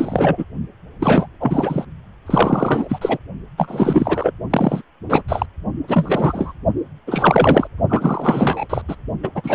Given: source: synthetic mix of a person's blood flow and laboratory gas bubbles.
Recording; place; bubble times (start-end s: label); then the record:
Doppler ultrasound of blood flow; precordium
0.00-0.45 s: bubbles
0.99-1.26 s: bubbles
1.40-1.85 s: bubbles
2.26-2.98 s: bubbles
3.01-3.18 s: bubbles
3.57-4.33 s: bubbles
4.50-4.82 s: bubbles
5.09-5.22 s: bubbles
5.28-5.46 s: bubbles
5.88-6.52 s: bubbles
7.07-7.67 s: bubbles
7.89-8.66 s: bubbles
8.70-8.82 s: bubbles
8.88-8.96 s: bubbles
9.23-9.29 s: bubbles
9.35-9.55 s: bubbles
From the record:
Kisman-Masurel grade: 343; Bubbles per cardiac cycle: rolling drumbeat, 9 or more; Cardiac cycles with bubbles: 100%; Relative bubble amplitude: loud (0.450 to 0.775); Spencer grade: 3 (all of the cardiac periods contain showers or single bubble signals, but not dominating or overriding the cardiac motion signals); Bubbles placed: only in the low amplitude regions of the cardiac cycle